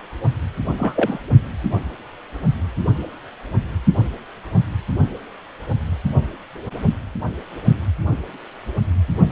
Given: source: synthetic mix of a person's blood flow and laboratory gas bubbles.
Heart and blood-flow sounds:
Doppler ultrasound of blood flow; precordium
0.77-1.19 s: bubbles
From the record:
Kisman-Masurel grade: 212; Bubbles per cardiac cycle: several, 3 to 8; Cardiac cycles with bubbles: 1 to 10%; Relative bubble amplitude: moderate (0.250 to 0.450); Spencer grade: 1 (occasional bubble signal discernible with the cardiac motion signal, with majority of cardiac periods free of bubbles); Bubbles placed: only in the low amplitude regions of the cardiac cycle

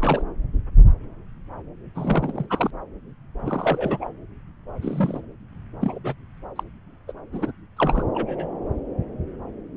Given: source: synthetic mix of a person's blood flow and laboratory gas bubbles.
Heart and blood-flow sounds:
Doppler ultrasound of blood flow; subclavian vein
0.00-0.22 s: bubbles
1.94-2.46 s: bubbles
2.50-2.71 s: bubbles
3.39-4.08 s: bubbles
4.82-5.21 s: bubbles
5.81-5.99 s: bubbles
6.04-6.14 s: bubbles
6.56-6.64 s: bubbles
7.08-7.12 s: bubbles
7.33-7.52 s: bubbles
7.77-8.05 s: bubbles
8.14-8.47 s: bubbles
From the record:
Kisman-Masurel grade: 232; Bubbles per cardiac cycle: several, 3 to 8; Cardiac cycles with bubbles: 50 to 99%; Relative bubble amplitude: moderate (0.250 to 0.450); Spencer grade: 3 (all of the cardiac periods contain showers or single bubble signals, but not dominating or overriding the cardiac motion signals); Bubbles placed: anywhere in the cardiac cycle

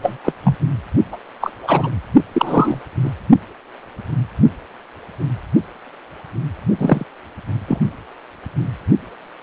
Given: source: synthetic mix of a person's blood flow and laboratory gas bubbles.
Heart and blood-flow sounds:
Doppler ultrasound of blood flow; precordium
0.02-0.17 s: bubbles
0.24-0.33 s: bubbles
0.43-0.56 s: bubbles
1.12-1.17 s: bubbles
1.41-1.50 s: bubbles
1.62-1.90 s: bubbles
2.32-2.81 s: bubbles
3.04-3.11 s: bubbles
6.78-7.04 s: bubbles
7.67-7.79 s: bubbles
From the record:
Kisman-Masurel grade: 233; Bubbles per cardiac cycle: several, 3 to 8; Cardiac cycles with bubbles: 50 to 99%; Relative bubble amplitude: loud (0.450 to 0.775); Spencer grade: 3 (all of the cardiac periods contain showers or single bubble signals, but not dominating or overriding the cardiac motion signals); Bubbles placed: only in the low amplitude regions of the cardiac cycle

